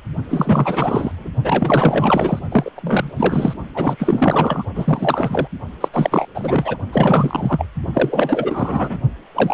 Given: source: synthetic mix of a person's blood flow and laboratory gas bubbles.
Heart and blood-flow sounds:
Doppler ultrasound of blood flow; precordium
0.29-1.29 s: bubbles
1.43-2.39 s: bubbles
2.51-2.71 s: bubbles
2.76-3.12 s: bubbles
3.16-3.54 s: bubbles
3.74-4.63 s: bubbles
4.75-5.48 s: bubbles
5.80-5.88 s: bubbles
5.92-6.29 s: bubbles
6.34-6.78 s: bubbles
6.92-7.66 s: bubbles
7.93-9.00 s: bubbles
9.35-9.54 s: bubbles
From the record:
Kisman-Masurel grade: 444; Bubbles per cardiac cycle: continuous sound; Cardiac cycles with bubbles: 100%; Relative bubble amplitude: maximal (0.775 to 0.999); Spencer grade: 4 (maximum detectable bubble signal sounding continuously throughout systole and diastole of every cardiac period, and overriding the amplitude of the normal cardiac signals); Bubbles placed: only in the low amplitude regions of the cardiac cycle

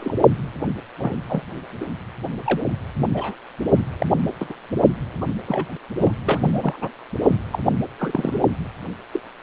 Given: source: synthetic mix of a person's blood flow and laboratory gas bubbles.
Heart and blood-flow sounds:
Doppler ultrasound of blood flow; precordium
0.00-0.16 s: bubbles
0.98-1.15 s: bubbles
1.28-1.43 s: bubbles
1.80-1.85 s: bubbles
2.44-2.60 s: bubbles
3.13-3.35 s: bubbles
4.00-4.06 s: bubbles
4.40-4.54 s: bubbles
5.21-5.26 s: bubbles
5.47-5.72 s: bubbles
6.00-6.13 s: bubbles
6.26-6.91 s: bubbles
7.22-7.35 s: bubbles
7.53-7.60 s: bubbles
7.98-8.39 s: bubbles
9.12-9.20 s: bubbles
From the record:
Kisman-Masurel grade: 242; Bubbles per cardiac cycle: several, 3 to 8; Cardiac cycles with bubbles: 100%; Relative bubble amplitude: moderate (0.250 to 0.450); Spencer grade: 3 (all of the cardiac periods contain showers or single bubble signals, but not dominating or overriding the cardiac motion signals); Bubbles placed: anywhere in the cardiac cycle

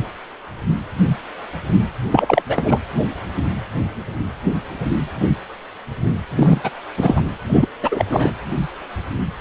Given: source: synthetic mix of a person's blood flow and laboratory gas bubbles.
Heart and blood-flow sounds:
Doppler ultrasound of blood flow; precordium
2.10-2.42 s: bubbles
2.46-2.79 s: bubbles
6.36-6.61 s: bubbles
6.63-6.70 s: bubbles
6.93-7.22 s: bubbles
7.49-7.68 s: bubbles
7.82-8.05 s: bubbles
8.09-8.30 s: bubbles
From the record:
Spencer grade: 3 (all of the cardiac periods contain showers or single bubble signals, but not dominating or overriding the cardiac motion signals); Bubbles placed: anywhere in the cardiac cycle

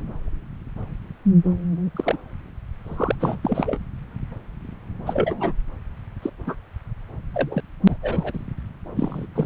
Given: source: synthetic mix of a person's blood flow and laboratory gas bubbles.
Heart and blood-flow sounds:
Doppler ultrasound of blood flow; subclavian vein
1.96-2.17 s: bubbles
2.83-3.79 s: bubbles
5.05-5.52 s: bubbles
6.22-6.30 s: bubbles
6.46-6.55 s: bubbles
7.34-7.60 s: bubbles
7.87-7.96 s: bubbles
8.02-8.39 s: bubbles
8.96-9.27 s: bubbles
9.35-9.46 s: bubbles
From the record:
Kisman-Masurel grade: 232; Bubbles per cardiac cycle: several, 3 to 8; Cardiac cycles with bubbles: 50 to 99%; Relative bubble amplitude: moderate (0.250 to 0.450); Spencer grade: 3 (all of the cardiac periods contain showers or single bubble signals, but not dominating or overriding the cardiac motion signals); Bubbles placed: anywhere in the cardiac cycle

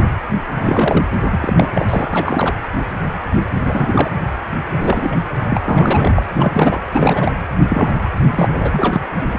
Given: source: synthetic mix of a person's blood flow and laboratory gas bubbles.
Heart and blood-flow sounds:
Doppler ultrasound of blood flow; precordium
0.54-1.04 s: bubbles
1.31-1.39 s: bubbles
1.42-2.54 s: bubbles
3.55-4.10 s: bubbles
4.79-5.16 s: bubbles
5.49-6.12 s: bubbles
6.16-6.22 s: bubbles
6.36-6.79 s: bubbles
6.92-7.33 s: bubbles
7.69-8.11 s: bubbles
8.26-8.46 s: bubbles
8.52-9.01 s: bubbles
9.33-9.39 s: bubbles
From the record:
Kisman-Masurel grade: 332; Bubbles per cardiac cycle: rolling drumbeat, 9 or more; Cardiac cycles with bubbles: 50 to 99%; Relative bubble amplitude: moderate (0.250 to 0.450); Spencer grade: 3 (all of the cardiac periods contain showers or single bubble signals, but not dominating or overriding the cardiac motion signals); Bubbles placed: anywhere in the cardiac cycle

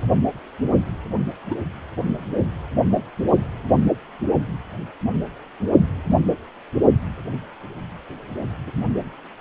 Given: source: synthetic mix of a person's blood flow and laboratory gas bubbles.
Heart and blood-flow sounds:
Doppler ultrasound of blood flow; precordium
1.50-1.57 s: bubbles
8.67-8.71 s: bubbles
8.77-8.84 s: bubbles
From the record:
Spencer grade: 2 (many but less than half of the cardiac periods contain bubble signals, singularly or in groups); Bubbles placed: only in the low amplitude regions of the cardiac cycle

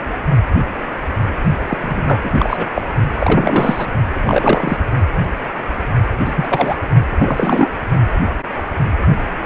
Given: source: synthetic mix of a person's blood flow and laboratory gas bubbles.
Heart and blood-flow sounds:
Doppler ultrasound of blood flow; precordium
1.68-1.77 s: bubbles
1.81-2.67 s: bubbles
2.74-2.82 s: bubbles
3.17-3.87 s: bubbles
4.13-4.78 s: bubbles
6.25-6.75 s: bubbles
7.09-7.69 s: bubbles
From the record:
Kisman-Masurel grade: 333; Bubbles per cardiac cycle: rolling drumbeat, 9 or more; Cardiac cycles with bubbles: 50 to 99%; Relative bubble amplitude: loud (0.450 to 0.775); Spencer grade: 3 (all of the cardiac periods contain showers or single bubble signals, but not dominating or overriding the cardiac motion signals); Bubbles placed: only in the low amplitude regions of the cardiac cycle

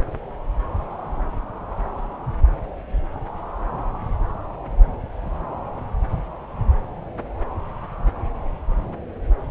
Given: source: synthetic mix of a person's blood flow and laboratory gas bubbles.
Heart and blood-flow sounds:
Doppler ultrasound of blood flow; subclavian vein
no bubbles
From the record:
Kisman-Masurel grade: 000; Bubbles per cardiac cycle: 0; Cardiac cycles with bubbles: 0%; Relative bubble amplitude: no bubbles discernible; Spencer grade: 0 (complete lack of bubble signals)

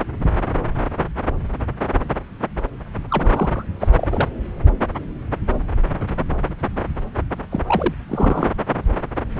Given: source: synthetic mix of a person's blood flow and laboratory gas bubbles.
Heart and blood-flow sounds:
Doppler ultrasound of blood flow; subclavian vein
3.08-3.65 s: bubbles
3.79-3.87 s: bubbles
3.97-4.28 s: bubbles
7.51-7.62 s: bubbles
7.67-7.94 s: bubbles
8.08-8.48 s: bubbles
From the record:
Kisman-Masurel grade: 222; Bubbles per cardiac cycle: several, 3 to 8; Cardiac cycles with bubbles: 10 to 50%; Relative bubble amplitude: moderate (0.250 to 0.450); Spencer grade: 2 (many but less than half of the cardiac periods contain bubble signals, singularly or in groups); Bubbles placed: anywhere in the cardiac cycle

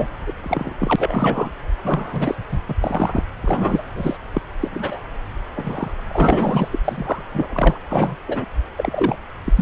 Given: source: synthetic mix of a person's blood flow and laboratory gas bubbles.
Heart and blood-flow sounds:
Doppler ultrasound of blood flow; subclavian vein
0.00-0.07 s: bubbles
0.27-0.33 s: bubbles
0.44-0.74 s: bubbles
0.79-1.51 s: bubbles
1.84-2.35 s: bubbles
2.51-2.59 s: bubbles
2.67-2.75 s: bubbles
2.81-3.23 s: bubbles
3.42-3.83 s: bubbles
3.96-4.17 s: bubbles
4.34-4.42 s: bubbles
4.60-4.68 s: bubbles
4.71-5.00 s: bubbles
5.56-5.88 s: bubbles
6.09-6.79 s: bubbles
6.84-7.25 s: bubbles
7.33-7.78 s: bubbles
7.90-8.16 s: bubbles
8.27-8.45 s: bubbles
8.76-9.17 s: bubbles
9.45-9.53 s: bubbles
9.55-9.62 s: bubbles
From the record:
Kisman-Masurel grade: 243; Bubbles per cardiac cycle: several, 3 to 8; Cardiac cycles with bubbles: 100%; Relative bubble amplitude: loud (0.450 to 0.775); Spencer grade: 3 (all of the cardiac periods contain showers or single bubble signals, but not dominating or overriding the cardiac motion signals); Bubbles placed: anywhere in the cardiac cycle

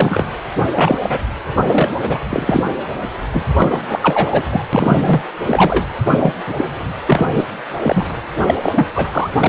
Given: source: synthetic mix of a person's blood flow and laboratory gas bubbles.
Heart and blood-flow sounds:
Doppler ultrasound of blood flow; precordium
0.00-0.26 s: bubbles
0.76-0.98 s: bubbles
1.02-1.19 s: bubbles
1.67-1.94 s: bubbles
2.02-2.19 s: bubbles
2.29-2.63 s: bubbles
3.33-3.46 s: bubbles
3.58-4.63 s: bubbles
4.73-5.21 s: bubbles
5.46-5.84 s: bubbles
6.12-6.33 s: bubbles
6.46-6.65 s: bubbles
7.08-7.26 s: bubbles
7.34-7.45 s: bubbles
7.83-8.05 s: bubbles
8.47-8.55 s: bubbles
8.62-8.86 s: bubbles
8.95-9.38 s: bubbles
9.40-9.49 s: bubbles
From the record:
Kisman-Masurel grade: 243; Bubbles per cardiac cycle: several, 3 to 8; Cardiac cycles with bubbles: 100%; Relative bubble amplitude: loud (0.450 to 0.775); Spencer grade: 3 (all of the cardiac periods contain showers or single bubble signals, but not dominating or overriding the cardiac motion signals); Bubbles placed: anywhere in the cardiac cycle

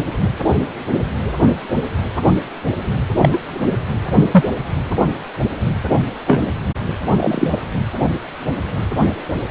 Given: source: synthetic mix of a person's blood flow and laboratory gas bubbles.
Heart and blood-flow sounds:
Doppler ultrasound of blood flow; precordium
3.22-3.30 s: bubbles
3.33-3.39 s: bubbles
4.31-4.44 s: bubbles
6.27-6.42 s: bubbles
7.10-7.58 s: bubbles
From the record:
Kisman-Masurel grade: 123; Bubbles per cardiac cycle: 1 to 2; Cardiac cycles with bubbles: 10 to 50%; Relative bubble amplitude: loud (0.450 to 0.775); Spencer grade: 2 (many but less than half of the cardiac periods contain bubble signals, singularly or in groups); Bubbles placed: anywhere in the cardiac cycle

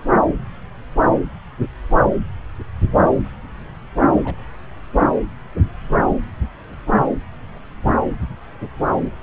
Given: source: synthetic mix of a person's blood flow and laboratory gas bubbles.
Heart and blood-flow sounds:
Doppler ultrasound of blood flow; subclavian vein
4.24-4.35 s: bubbles
From the record:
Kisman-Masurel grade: 111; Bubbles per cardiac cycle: 1 to 2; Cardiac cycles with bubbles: 1 to 10%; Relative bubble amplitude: barely perceptible (0.100 to 0.250); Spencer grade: 1 (occasional bubble signal discernible with the cardiac motion signal, with majority of cardiac periods free of bubbles); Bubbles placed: anywhere in the cardiac cycle

